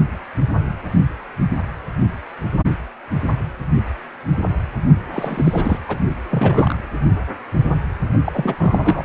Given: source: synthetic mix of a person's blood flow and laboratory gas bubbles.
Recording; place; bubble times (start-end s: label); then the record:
Doppler ultrasound of blood flow; precordium
5.12-5.79 s: bubbles
5.88-5.99 s: bubbles
6.30-6.80 s: bubbles
8.25-8.55 s: bubbles
8.58-9.05 s: bubbles
From the record:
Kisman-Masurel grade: 232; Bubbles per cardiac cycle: several, 3 to 8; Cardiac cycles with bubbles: 50 to 99%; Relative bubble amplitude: moderate (0.250 to 0.450); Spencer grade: 3 (all of the cardiac periods contain showers or single bubble signals, but not dominating or overriding the cardiac motion signals); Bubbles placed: only in the low amplitude regions of the cardiac cycle